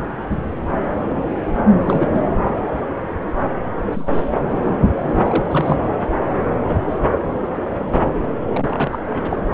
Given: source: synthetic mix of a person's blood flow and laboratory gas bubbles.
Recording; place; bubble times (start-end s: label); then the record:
Doppler ultrasound of blood flow; subclavian vein
1.84-2.29 s: bubbles
3.92-4.44 s: bubbles
4.63-5.46 s: bubbles
5.51-5.78 s: bubbles
8.52-8.99 s: bubbles
9.06-9.37 s: bubbles
9.52-9.54 s: bubbles
From the record:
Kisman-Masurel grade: 222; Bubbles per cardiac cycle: several, 3 to 8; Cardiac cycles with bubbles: 10 to 50%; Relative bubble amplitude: moderate (0.250 to 0.450); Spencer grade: 2 (many but less than half of the cardiac periods contain bubble signals, singularly or in groups); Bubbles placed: anywhere in the cardiac cycle